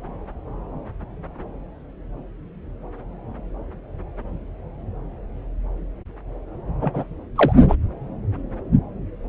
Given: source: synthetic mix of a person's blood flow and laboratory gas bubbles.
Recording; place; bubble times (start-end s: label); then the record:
Doppler ultrasound of blood flow; subclavian vein
6.81-7.14 s: bubbles
7.36-7.53 s: bubbles
7.68-7.75 s: bubbles
From the record:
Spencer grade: 1 (occasional bubble signal discernible with the cardiac motion signal, with majority of cardiac periods free of bubbles); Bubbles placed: anywhere in the cardiac cycle